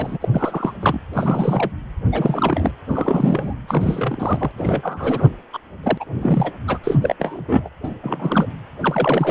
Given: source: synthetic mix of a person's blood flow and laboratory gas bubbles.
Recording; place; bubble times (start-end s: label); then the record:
Doppler ultrasound of blood flow; precordium
0.00-0.17 s: bubbles
0.21-0.28 s: bubbles
0.33-0.74 s: bubbles
0.81-0.99 s: bubbles
1.13-1.71 s: bubbles
2.12-2.71 s: bubbles
2.88-3.54 s: bubbles
3.67-4.51 s: bubbles
4.58-5.29 s: bubbles
5.53-5.58 s: bubbles
5.83-6.04 s: bubbles
6.13-6.53 s: bubbles
6.67-6.79 s: bubbles
6.83-6.99 s: bubbles
7.01-7.15 s: bubbles
7.20-7.70 s: bubbles
7.83-7.94 s: bubbles
8.01-8.46 s: bubbles
8.80-9.31 s: bubbles
From the record:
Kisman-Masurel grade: 343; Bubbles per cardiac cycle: rolling drumbeat, 9 or more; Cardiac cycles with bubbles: 100%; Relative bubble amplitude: loud (0.450 to 0.775); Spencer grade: 3 (all of the cardiac periods contain showers or single bubble signals, but not dominating or overriding the cardiac motion signals); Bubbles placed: anywhere in the cardiac cycle